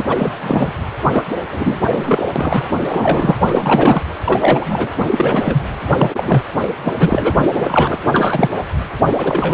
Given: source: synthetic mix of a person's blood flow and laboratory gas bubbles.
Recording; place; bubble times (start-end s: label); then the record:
Doppler ultrasound of blood flow; precordium
0.00-0.04 s: bubbles
0.08-0.32 s: bubbles
0.35-0.72 s: bubbles
1.10-1.24 s: bubbles
1.50-1.80 s: bubbles
1.89-2.29 s: bubbles
2.35-2.65 s: bubbles
2.81-3.37 s: bubbles
3.45-4.02 s: bubbles
4.25-5.02 s: bubbles
5.10-5.67 s: bubbles
5.97-6.44 s: bubbles
6.84-6.92 s: bubbles
6.99-7.99 s: bubbles
8.12-8.51 s: bubbles
9.17-9.54 s: bubbles
From the record:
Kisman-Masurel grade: 343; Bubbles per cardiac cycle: rolling drumbeat, 9 or more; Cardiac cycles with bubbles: 100%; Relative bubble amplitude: loud (0.450 to 0.775); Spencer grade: 3 (all of the cardiac periods contain showers or single bubble signals, but not dominating or overriding the cardiac motion signals); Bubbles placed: anywhere in the cardiac cycle